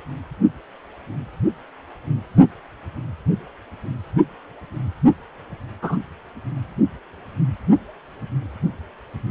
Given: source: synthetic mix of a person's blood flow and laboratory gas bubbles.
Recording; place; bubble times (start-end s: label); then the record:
Doppler ultrasound of blood flow; precordium
5.81-5.98 s: bubbles
From the record:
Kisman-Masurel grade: 112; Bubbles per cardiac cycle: 1 to 2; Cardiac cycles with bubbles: 1 to 10%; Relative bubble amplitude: moderate (0.250 to 0.450); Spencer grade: 1 (occasional bubble signal discernible with the cardiac motion signal, with majority of cardiac periods free of bubbles); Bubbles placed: only in the low amplitude regions of the cardiac cycle